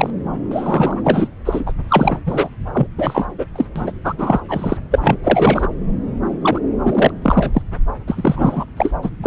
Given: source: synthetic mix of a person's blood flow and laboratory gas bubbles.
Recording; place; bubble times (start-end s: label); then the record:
Doppler ultrasound of blood flow; subclavian vein
0.00-0.10 s: bubbles
0.51-1.28 s: bubbles
1.45-1.72 s: bubbles
1.89-2.20 s: bubbles
2.26-2.48 s: bubbles
2.74-2.87 s: bubbles
2.98-3.27 s: bubbles
3.38-3.45 s: bubbles
3.55-3.65 s: bubbles
3.75-3.92 s: bubbles
4.04-4.13 s: bubbles
4.17-4.40 s: bubbles
4.48-4.77 s: bubbles
4.90-5.17 s: bubbles
5.23-5.67 s: bubbles
6.42-6.59 s: bubbles
6.84-7.11 s: bubbles
7.21-7.62 s: bubbles
8.07-8.65 s: bubbles
8.77-8.91 s: bubbles
9.03-9.10 s: bubbles
9.23-9.27 s: bubbles
From the record:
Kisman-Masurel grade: 343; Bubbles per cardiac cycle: rolling drumbeat, 9 or more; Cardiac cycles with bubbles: 100%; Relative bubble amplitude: loud (0.450 to 0.775); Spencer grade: 3 (all of the cardiac periods contain showers or single bubble signals, but not dominating or overriding the cardiac motion signals); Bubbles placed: anywhere in the cardiac cycle